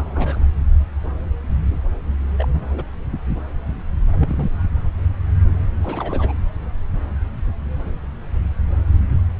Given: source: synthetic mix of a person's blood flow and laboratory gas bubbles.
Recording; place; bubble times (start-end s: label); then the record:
Doppler ultrasound of blood flow; subclavian vein
0.00-0.46 s: bubbles
2.38-2.48 s: bubbles
2.54-2.84 s: bubbles
4.12-4.66 s: bubbles
5.83-6.33 s: bubbles
From the record:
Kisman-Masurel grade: 221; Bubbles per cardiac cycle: several, 3 to 8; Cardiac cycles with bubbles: 10 to 50%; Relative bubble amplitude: barely perceptible (0.100 to 0.250); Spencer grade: 2 (many but less than half of the cardiac periods contain bubble signals, singularly or in groups); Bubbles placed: anywhere in the cardiac cycle